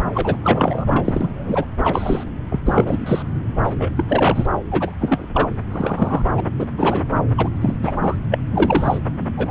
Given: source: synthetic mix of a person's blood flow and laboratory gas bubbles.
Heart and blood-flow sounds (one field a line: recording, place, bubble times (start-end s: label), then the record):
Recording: Doppler ultrasound of blood flow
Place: subclavian vein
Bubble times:
0.13-0.36 s: bubbles
0.43-1.66 s: bubbles
1.83-2.24 s: bubbles
2.49-2.60 s: bubbles
2.66-3.22 s: bubbles
3.64-3.75 s: bubbles
3.79-3.91 s: bubbles
3.96-4.05 s: bubbles
4.08-4.47 s: bubbles
4.71-4.95 s: bubbles
4.98-5.28 s: bubbles
5.34-5.49 s: bubbles
5.71-6.22 s: bubbles
6.34-6.40 s: bubbles
6.58-6.67 s: bubbles
6.77-7.06 s: bubbles
7.37-7.49 s: bubbles
7.60-7.74 s: bubbles
7.82-7.98 s: bubbles
8.02-8.16 s: bubbles
8.31-8.38 s: bubbles
8.51-8.99 s: bubbles
9.37-9.51 s: bubbles
From the record:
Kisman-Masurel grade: 243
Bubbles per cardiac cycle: several, 3 to 8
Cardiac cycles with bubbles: 100%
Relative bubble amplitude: loud (0.450 to 0.775)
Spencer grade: 3 (all of the cardiac periods contain showers or single bubble signals, but not dominating or overriding the cardiac motion signals)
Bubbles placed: anywhere in the cardiac cycle